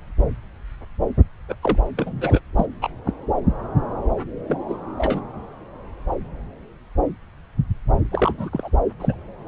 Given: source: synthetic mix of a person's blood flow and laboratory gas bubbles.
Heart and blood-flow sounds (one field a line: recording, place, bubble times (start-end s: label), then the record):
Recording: Doppler ultrasound of blood flow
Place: subclavian vein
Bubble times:
1.48-1.55 s: bubbles
1.62-1.77 s: bubbles
1.96-2.40 s: bubbles
2.57-2.66 s: bubbles
2.81-2.89 s: bubbles
3.05-3.13 s: bubbles
4.47-4.59 s: bubbles
4.68-4.75 s: bubbles
4.97-5.21 s: bubbles
8.12-8.49 s: bubbles
8.52-8.70 s: bubbles
8.99-9.15 s: bubbles
From the record:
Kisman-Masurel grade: 222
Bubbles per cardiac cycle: several, 3 to 8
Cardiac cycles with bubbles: 10 to 50%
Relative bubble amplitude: moderate (0.250 to 0.450)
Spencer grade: 2 (many but less than half of the cardiac periods contain bubble signals, singularly or in groups)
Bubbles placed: anywhere in the cardiac cycle